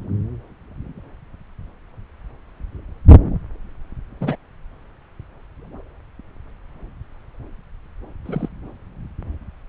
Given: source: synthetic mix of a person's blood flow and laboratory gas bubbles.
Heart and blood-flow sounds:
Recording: Doppler ultrasound of blood flow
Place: subclavian vein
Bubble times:
4.21-4.35 s: bubbles
8.26-8.49 s: bubbles
From the record:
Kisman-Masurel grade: 122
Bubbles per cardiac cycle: 1 to 2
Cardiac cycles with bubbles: 10 to 50%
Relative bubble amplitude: moderate (0.250 to 0.450)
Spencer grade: 2 (many but less than half of the cardiac periods contain bubble signals, singularly or in groups)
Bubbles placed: anywhere in the cardiac cycle

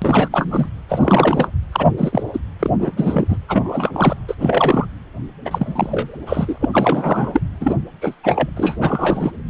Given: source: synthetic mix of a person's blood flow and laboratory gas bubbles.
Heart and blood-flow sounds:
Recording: Doppler ultrasound of blood flow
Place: precordium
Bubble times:
0.02-0.70 s: bubbles
0.89-1.48 s: bubbles
1.72-1.87 s: bubbles
1.98-2.23 s: bubbles
2.33-2.39 s: bubbles
2.59-2.71 s: bubbles
2.79-2.94 s: bubbles
2.96-3.37 s: bubbles
3.48-4.16 s: bubbles
4.28-4.35 s: bubbles
4.40-4.86 s: bubbles
5.45-6.18 s: bubbles
6.26-6.69 s: bubbles
6.73-7.41 s: bubbles
7.60-7.75 s: bubbles
8.01-8.14 s: bubbles
8.23-8.49 s: bubbles
8.56-8.76 s: bubbles
8.80-9.31 s: bubbles
From the record:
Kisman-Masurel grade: 343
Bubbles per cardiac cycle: rolling drumbeat, 9 or more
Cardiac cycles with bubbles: 100%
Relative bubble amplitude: loud (0.450 to 0.775)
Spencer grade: 3 (all of the cardiac periods contain showers or single bubble signals, but not dominating or overriding the cardiac motion signals)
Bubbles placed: anywhere in the cardiac cycle

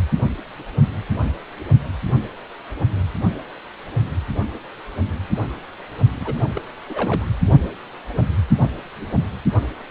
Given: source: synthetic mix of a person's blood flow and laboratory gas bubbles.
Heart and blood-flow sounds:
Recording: Doppler ultrasound of blood flow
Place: precordium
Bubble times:
6.21-6.34 s: bubbles
6.54-6.61 s: bubbles
6.89-7.25 s: bubbles
From the record:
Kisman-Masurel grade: 211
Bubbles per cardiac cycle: several, 3 to 8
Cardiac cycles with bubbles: 1 to 10%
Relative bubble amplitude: barely perceptible (0.100 to 0.250)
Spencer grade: 1 (occasional bubble signal discernible with the cardiac motion signal, with majority of cardiac periods free of bubbles)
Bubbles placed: only in the low amplitude regions of the cardiac cycle

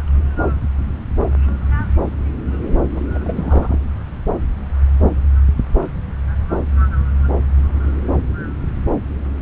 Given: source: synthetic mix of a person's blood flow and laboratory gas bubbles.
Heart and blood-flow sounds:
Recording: Doppler ultrasound of blood flow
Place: subclavian vein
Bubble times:
2.95-3.01 s: bubbles
3.14-3.19 s: bubbles
3.24-3.79 s: bubbles
From the record:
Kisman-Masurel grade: 212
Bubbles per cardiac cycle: several, 3 to 8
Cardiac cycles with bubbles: 1 to 10%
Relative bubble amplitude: moderate (0.250 to 0.450)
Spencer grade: 1 (occasional bubble signal discernible with the cardiac motion signal, with majority of cardiac periods free of bubbles)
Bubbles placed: anywhere in the cardiac cycle

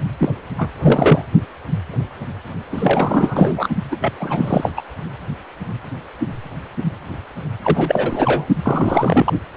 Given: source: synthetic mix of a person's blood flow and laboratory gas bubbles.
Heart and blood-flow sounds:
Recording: Doppler ultrasound of blood flow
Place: precordium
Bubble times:
0.00-0.04 s: bubbles
0.17-0.34 s: bubbles
0.58-0.71 s: bubbles
0.82-1.25 s: bubbles
2.72-3.68 s: bubbles
3.91-3.96 s: bubbles
4.00-4.12 s: bubbles
4.18-4.71 s: bubbles
4.76-4.81 s: bubbles
7.63-8.47 s: bubbles
8.62-9.33 s: bubbles
From the record:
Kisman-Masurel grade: 333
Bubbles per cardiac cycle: rolling drumbeat, 9 or more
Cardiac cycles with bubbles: 50 to 99%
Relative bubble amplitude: loud (0.450 to 0.775)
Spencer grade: 3 (all of the cardiac periods contain showers or single bubble signals, but not dominating or overriding the cardiac motion signals)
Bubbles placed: only in the low amplitude regions of the cardiac cycle

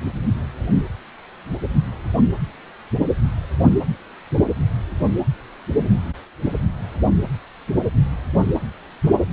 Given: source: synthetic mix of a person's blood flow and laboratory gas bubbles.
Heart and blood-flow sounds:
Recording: Doppler ultrasound of blood flow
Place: precordium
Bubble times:
no bubbles
From the record:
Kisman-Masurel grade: 000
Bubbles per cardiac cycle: 0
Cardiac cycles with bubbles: 0%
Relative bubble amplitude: no bubbles discernible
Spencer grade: 0 (complete lack of bubble signals)

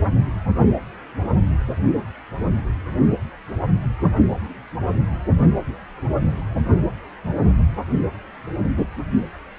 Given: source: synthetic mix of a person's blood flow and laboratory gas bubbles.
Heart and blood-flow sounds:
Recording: Doppler ultrasound of blood flow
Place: precordium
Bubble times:
no bubbles
From the record:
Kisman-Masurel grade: 000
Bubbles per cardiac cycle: 0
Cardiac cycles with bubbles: 0%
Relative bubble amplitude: no bubbles discernible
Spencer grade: 0 (complete lack of bubble signals)

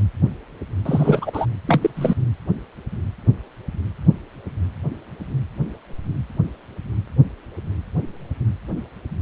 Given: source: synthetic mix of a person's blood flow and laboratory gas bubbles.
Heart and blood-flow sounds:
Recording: Doppler ultrasound of blood flow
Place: precordium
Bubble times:
0.85-1.46 s: bubbles
1.67-1.90 s: bubbles
1.96-2.14 s: bubbles
From the record:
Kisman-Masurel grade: 223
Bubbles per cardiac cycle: several, 3 to 8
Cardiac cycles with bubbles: 10 to 50%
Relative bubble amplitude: loud (0.450 to 0.775)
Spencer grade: 2 (many but less than half of the cardiac periods contain bubble signals, singularly or in groups)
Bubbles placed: anywhere in the cardiac cycle

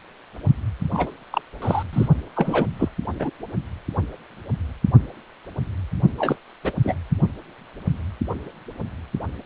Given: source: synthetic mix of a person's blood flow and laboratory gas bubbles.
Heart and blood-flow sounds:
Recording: Doppler ultrasound of blood flow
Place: precordium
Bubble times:
0.93-1.11 s: bubbles
1.31-1.42 s: bubbles
1.62-1.83 s: bubbles
1.93-2.08 s: bubbles
2.35-2.69 s: bubbles
2.79-2.89 s: bubbles
3.19-3.30 s: bubbles
6.17-6.36 s: bubbles
6.63-6.72 s: bubbles
6.83-6.95 s: bubbles
From the record:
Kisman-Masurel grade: 233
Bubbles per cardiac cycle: several, 3 to 8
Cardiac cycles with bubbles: 50 to 99%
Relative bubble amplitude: loud (0.450 to 0.775)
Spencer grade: 3 (all of the cardiac periods contain showers or single bubble signals, but not dominating or overriding the cardiac motion signals)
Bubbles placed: only in the low amplitude regions of the cardiac cycle

